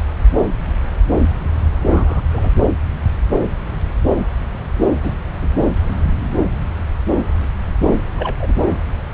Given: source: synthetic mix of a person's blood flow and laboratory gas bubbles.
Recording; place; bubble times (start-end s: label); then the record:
Doppler ultrasound of blood flow; subclavian vein
1.88-2.22 s: bubbles
2.29-2.50 s: bubbles
5.03-5.15 s: bubbles
5.42-5.48 s: bubbles
5.54-5.67 s: bubbles
7.79-7.95 s: bubbles
8.16-8.71 s: bubbles
From the record:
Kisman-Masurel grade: 222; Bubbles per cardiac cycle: several, 3 to 8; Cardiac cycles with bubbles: 10 to 50%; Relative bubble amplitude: moderate (0.250 to 0.450); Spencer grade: 2 (many but less than half of the cardiac periods contain bubble signals, singularly or in groups); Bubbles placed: anywhere in the cardiac cycle